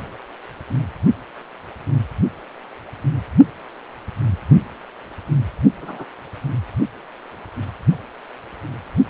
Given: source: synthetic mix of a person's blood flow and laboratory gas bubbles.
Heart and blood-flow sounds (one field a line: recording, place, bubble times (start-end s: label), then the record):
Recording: Doppler ultrasound of blood flow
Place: precordium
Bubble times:
5.81-6.05 s: bubbles
From the record:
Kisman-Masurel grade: 121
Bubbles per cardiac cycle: 1 to 2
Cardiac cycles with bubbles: 10 to 50%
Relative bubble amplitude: barely perceptible (0.100 to 0.250)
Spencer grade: 2 (many but less than half of the cardiac periods contain bubble signals, singularly or in groups)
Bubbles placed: only in the low amplitude regions of the cardiac cycle